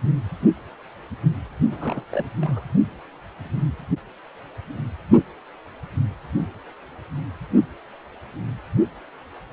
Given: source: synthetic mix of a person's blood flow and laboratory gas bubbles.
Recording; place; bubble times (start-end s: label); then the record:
Doppler ultrasound of blood flow; precordium
1.70-2.05 s: bubbles
2.10-2.25 s: bubbles
2.41-2.65 s: bubbles
From the record:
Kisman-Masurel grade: 211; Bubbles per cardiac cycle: several, 3 to 8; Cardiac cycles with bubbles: 1 to 10%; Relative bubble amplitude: barely perceptible (0.100 to 0.250); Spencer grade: 1 (occasional bubble signal discernible with the cardiac motion signal, with majority of cardiac periods free of bubbles); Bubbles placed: only in the low amplitude regions of the cardiac cycle